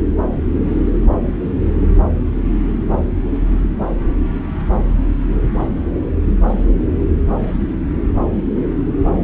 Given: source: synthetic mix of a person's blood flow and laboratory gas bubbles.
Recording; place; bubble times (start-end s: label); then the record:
Doppler ultrasound of blood flow; subclavian vein
no bubbles
From the record:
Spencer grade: 0 (complete lack of bubble signals)